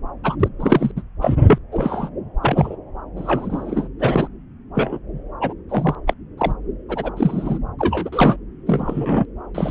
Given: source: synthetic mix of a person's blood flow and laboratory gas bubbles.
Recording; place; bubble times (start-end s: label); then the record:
Doppler ultrasound of blood flow; subclavian vein
0.24-0.35 s: bubbles
0.40-0.48 s: bubbles
0.60-0.91 s: bubbles
0.96-1.01 s: bubbles
1.21-1.35 s: bubbles
1.47-1.58 s: bubbles
1.71-2.10 s: bubbles
2.42-2.75 s: bubbles
3.17-3.88 s: bubbles
3.99-4.28 s: bubbles
4.74-4.99 s: bubbles
5.41-5.53 s: bubbles
5.69-5.95 s: bubbles
6.07-6.13 s: bubbles
6.38-6.52 s: bubbles
6.88-7.11 s: bubbles
7.17-7.58 s: bubbles
7.79-8.37 s: bubbles
8.66-9.26 s: bubbles
9.54-9.71 s: bubbles
From the record:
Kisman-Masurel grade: 242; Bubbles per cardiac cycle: several, 3 to 8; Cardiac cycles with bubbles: 100%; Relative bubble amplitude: moderate (0.250 to 0.450); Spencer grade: 3 (all of the cardiac periods contain showers or single bubble signals, but not dominating or overriding the cardiac motion signals); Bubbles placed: anywhere in the cardiac cycle